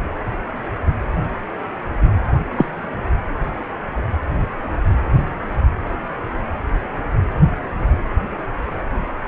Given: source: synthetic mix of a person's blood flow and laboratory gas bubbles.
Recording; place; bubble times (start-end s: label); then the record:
Doppler ultrasound of blood flow; precordium
2.56-2.66 s: bubbles
From the record:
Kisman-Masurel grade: 113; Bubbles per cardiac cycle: 1 to 2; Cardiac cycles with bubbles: 1 to 10%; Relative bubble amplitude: loud (0.450 to 0.775); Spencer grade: 1 (occasional bubble signal discernible with the cardiac motion signal, with majority of cardiac periods free of bubbles); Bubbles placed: anywhere in the cardiac cycle